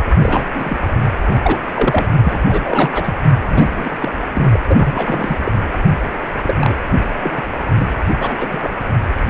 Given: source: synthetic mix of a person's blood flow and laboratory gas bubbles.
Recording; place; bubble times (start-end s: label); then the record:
Doppler ultrasound of blood flow; precordium
0.21-0.46 s: bubbles
0.54-0.80 s: bubbles
1.22-1.39 s: bubbles
1.43-1.61 s: bubbles
1.74-2.06 s: bubbles
2.24-2.40 s: bubbles
2.47-2.91 s: bubbles
2.94-3.15 s: bubbles
3.49-3.98 s: bubbles
4.00-4.12 s: bubbles
4.33-4.60 s: bubbles
4.69-5.36 s: bubbles
5.45-5.52 s: bubbles
5.73-5.75 s: bubbles
6.13-6.18 s: bubbles
6.43-6.54 s: bubbles
6.58-6.75 s: bubbles
7.22-7.44 s: bubbles
7.74-7.88 s: bubbles
8.19-8.76 s: bubbles
9.27-9.30 s: bubbles
From the record:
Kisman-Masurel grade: 242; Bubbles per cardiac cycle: several, 3 to 8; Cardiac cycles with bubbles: 100%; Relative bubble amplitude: moderate (0.250 to 0.450); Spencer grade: 3 (all of the cardiac periods contain showers or single bubble signals, but not dominating or overriding the cardiac motion signals); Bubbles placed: anywhere in the cardiac cycle